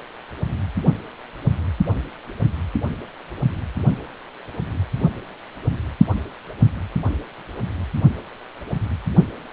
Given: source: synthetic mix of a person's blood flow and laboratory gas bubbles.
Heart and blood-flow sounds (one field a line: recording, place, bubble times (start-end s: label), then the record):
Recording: Doppler ultrasound of blood flow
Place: precordium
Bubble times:
no bubbles
From the record:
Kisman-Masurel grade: 000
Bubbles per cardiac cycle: 0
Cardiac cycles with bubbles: 0%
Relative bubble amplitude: no bubbles discernible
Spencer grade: 0 (complete lack of bubble signals)